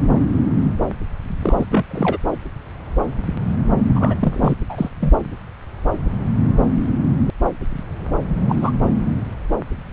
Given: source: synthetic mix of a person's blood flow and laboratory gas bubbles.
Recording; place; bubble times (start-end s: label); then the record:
Doppler ultrasound of blood flow; subclavian vein
1.42-1.55 s: bubbles
1.58-1.65 s: bubbles
1.71-1.83 s: bubbles
1.90-2.18 s: bubbles
3.95-4.54 s: bubbles
4.69-4.89 s: bubbles
5.00-5.14 s: bubbles
8.48-8.71 s: bubbles
From the record:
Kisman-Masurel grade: 222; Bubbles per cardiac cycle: several, 3 to 8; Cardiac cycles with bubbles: 10 to 50%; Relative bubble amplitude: moderate (0.250 to 0.450); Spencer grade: 2 (many but less than half of the cardiac periods contain bubble signals, singularly or in groups); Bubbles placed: anywhere in the cardiac cycle